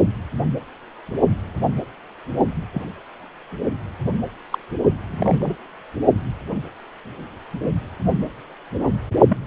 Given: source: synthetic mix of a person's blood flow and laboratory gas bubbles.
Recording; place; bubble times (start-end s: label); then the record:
Doppler ultrasound of blood flow; precordium
2.73-2.82 s: bubbles
4.50-4.58 s: bubbles
5.11-5.55 s: bubbles
9.29-9.37 s: bubbles
From the record:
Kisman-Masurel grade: 122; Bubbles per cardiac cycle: 1 to 2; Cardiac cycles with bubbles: 10 to 50%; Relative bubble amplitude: moderate (0.250 to 0.450); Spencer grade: 2 (many but less than half of the cardiac periods contain bubble signals, singularly or in groups); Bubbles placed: only in the low amplitude regions of the cardiac cycle